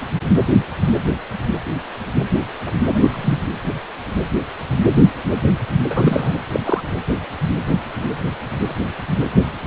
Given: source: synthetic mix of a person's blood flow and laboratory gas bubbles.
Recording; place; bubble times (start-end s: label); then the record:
Doppler ultrasound of blood flow; precordium
2.94-3.40 s: bubbles
5.89-6.33 s: bubbles
6.52-6.60 s: bubbles
6.66-6.80 s: bubbles
From the record:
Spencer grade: 2 (many but less than half of the cardiac periods contain bubble signals, singularly or in groups); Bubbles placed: anywhere in the cardiac cycle